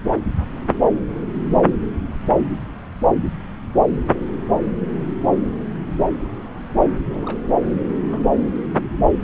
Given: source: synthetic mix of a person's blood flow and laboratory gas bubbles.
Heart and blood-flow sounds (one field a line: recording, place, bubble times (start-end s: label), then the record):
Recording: Doppler ultrasound of blood flow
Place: subclavian vein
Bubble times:
7.10-7.41 s: bubbles
8.04-8.20 s: bubbles
From the record:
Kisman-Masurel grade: 111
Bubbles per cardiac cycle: 1 to 2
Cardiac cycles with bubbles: 1 to 10%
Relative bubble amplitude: barely perceptible (0.100 to 0.250)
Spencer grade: 1 (occasional bubble signal discernible with the cardiac motion signal, with majority of cardiac periods free of bubbles)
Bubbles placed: anywhere in the cardiac cycle